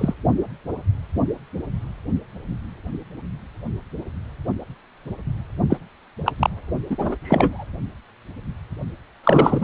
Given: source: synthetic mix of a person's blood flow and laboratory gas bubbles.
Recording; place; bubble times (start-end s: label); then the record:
Doppler ultrasound of blood flow; precordium
0.00-0.14 s: bubbles
5.70-5.77 s: bubbles
6.25-6.32 s: bubbles
6.38-6.50 s: bubbles
6.90-7.17 s: bubbles
7.24-7.66 s: bubbles
9.23-9.63 s: bubbles
From the record:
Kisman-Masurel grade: 223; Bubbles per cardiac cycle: several, 3 to 8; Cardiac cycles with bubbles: 10 to 50%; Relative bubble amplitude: loud (0.450 to 0.775); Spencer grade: 2 (many but less than half of the cardiac periods contain bubble signals, singularly or in groups); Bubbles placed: only in the low amplitude regions of the cardiac cycle